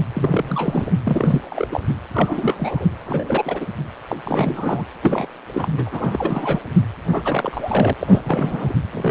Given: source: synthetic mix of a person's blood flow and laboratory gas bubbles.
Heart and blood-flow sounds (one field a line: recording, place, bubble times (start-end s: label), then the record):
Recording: Doppler ultrasound of blood flow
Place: precordium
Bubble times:
0.14-0.91 s: bubbles
1.03-1.41 s: bubbles
1.44-1.68 s: bubbles
1.71-1.81 s: bubbles
2.14-2.87 s: bubbles
3.04-3.67 s: bubbles
4.09-4.17 s: bubbles
4.25-4.85 s: bubbles
5.03-5.29 s: bubbles
5.54-6.60 s: bubbles
7.12-7.93 s: bubbles
7.99-8.75 s: bubbles
8.92-9.11 s: bubbles
From the record:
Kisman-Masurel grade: 342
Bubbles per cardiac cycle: rolling drumbeat, 9 or more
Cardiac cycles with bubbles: 100%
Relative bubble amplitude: moderate (0.250 to 0.450)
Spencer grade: 3 (all of the cardiac periods contain showers or single bubble signals, but not dominating or overriding the cardiac motion signals)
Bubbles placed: anywhere in the cardiac cycle